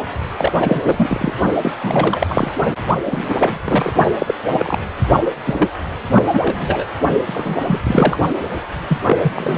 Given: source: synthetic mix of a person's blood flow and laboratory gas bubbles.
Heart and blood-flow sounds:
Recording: Doppler ultrasound of blood flow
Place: precordium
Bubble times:
0.36-1.33 s: bubbles
1.62-1.72 s: bubbles
1.83-2.52 s: bubbles
3.06-3.58 s: bubbles
3.64-3.93 s: bubbles
4.19-4.34 s: bubbles
4.52-4.78 s: bubbles
5.44-5.67 s: bubbles
6.15-6.23 s: bubbles
6.33-6.40 s: bubbles
6.45-6.85 s: bubbles
7.26-7.79 s: bubbles
7.83-8.17 s: bubbles
8.89-8.98 s: bubbles
9.06-9.16 s: bubbles
9.22-9.33 s: bubbles
9.36-9.58 s: bubbles
From the record:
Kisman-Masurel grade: 243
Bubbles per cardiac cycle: several, 3 to 8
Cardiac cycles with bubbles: 100%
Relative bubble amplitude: loud (0.450 to 0.775)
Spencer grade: 3 (all of the cardiac periods contain showers or single bubble signals, but not dominating or overriding the cardiac motion signals)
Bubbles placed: only in the low amplitude regions of the cardiac cycle

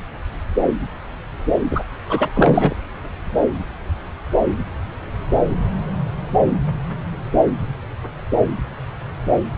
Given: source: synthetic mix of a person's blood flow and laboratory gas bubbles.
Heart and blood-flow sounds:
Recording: Doppler ultrasound of blood flow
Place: subclavian vein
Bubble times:
1.71-1.81 s: bubbles
2.09-2.29 s: bubbles
2.34-2.75 s: bubbles
From the record:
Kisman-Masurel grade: 213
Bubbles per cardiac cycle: several, 3 to 8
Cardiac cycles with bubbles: 1 to 10%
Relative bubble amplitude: loud (0.450 to 0.775)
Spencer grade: 1 (occasional bubble signal discernible with the cardiac motion signal, with majority of cardiac periods free of bubbles)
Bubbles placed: anywhere in the cardiac cycle

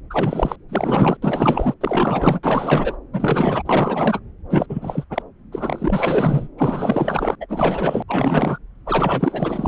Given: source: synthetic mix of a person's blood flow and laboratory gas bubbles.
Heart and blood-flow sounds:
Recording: Doppler ultrasound of blood flow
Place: subclavian vein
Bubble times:
0.10-0.56 s: bubbles
0.68-1.17 s: bubbles
1.22-1.74 s: bubbles
1.80-2.40 s: bubbles
2.43-2.97 s: bubbles
3.12-3.62 s: bubbles
3.65-4.20 s: bubbles
4.50-4.66 s: bubbles
4.69-5.05 s: bubbles
5.10-5.22 s: bubbles
5.52-6.49 s: bubbles
6.58-7.36 s: bubbles
7.40-8.03 s: bubbles
8.08-8.58 s: bubbles
8.86-9.68 s: bubbles
From the record:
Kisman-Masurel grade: 444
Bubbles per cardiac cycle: continuous sound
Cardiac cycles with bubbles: 100%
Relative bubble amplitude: maximal (0.775 to 0.999)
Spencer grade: 4 (maximum detectable bubble signal sounding continuously throughout systole and diastole of every cardiac period, and overriding the amplitude of the normal cardiac signals)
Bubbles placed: anywhere in the cardiac cycle

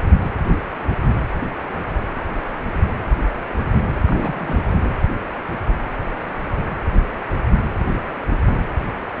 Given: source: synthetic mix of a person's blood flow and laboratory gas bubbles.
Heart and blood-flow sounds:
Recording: Doppler ultrasound of blood flow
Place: precordium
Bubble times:
4.05-4.80 s: bubbles
From the record:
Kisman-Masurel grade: 211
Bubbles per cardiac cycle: several, 3 to 8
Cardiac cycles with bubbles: 1 to 10%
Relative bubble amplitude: barely perceptible (0.100 to 0.250)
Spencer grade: 1 (occasional bubble signal discernible with the cardiac motion signal, with majority of cardiac periods free of bubbles)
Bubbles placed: anywhere in the cardiac cycle

